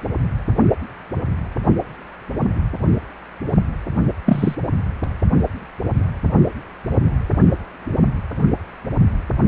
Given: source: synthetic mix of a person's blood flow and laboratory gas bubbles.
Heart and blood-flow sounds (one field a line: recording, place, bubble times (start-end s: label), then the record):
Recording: Doppler ultrasound of blood flow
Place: precordium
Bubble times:
4.25-4.55 s: bubbles
From the record:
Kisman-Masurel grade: 123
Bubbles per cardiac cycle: 1 to 2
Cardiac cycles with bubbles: 10 to 50%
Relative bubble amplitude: loud (0.450 to 0.775)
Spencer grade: 2 (many but less than half of the cardiac periods contain bubble signals, singularly or in groups)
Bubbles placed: only in the low amplitude regions of the cardiac cycle